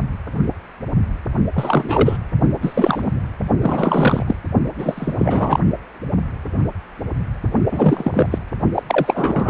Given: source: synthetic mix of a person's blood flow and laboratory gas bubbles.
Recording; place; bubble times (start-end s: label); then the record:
Doppler ultrasound of blood flow; precordium
1.55-2.17 s: bubbles
2.61-3.12 s: bubbles
3.62-4.36 s: bubbles
4.78-5.59 s: bubbles
7.71-8.28 s: bubbles
8.30-8.38 s: bubbles
8.74-8.83 s: bubbles
8.87-9.50 s: bubbles
From the record:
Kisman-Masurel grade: 333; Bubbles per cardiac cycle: rolling drumbeat, 9 or more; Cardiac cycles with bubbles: 50 to 99%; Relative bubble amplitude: loud (0.450 to 0.775); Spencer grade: 3 (all of the cardiac periods contain showers or single bubble signals, but not dominating or overriding the cardiac motion signals); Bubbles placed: only in the low amplitude regions of the cardiac cycle